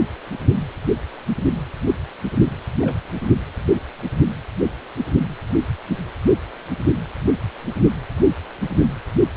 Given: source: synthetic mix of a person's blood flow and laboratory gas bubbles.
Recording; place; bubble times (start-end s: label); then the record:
Doppler ultrasound of blood flow; precordium
2.81-2.98 s: bubbles
From the record:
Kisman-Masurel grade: 111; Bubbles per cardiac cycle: 1 to 2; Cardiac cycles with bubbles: 1 to 10%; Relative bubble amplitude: barely perceptible (0.100 to 0.250); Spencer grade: 1 (occasional bubble signal discernible with the cardiac motion signal, with majority of cardiac periods free of bubbles); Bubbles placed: anywhere in the cardiac cycle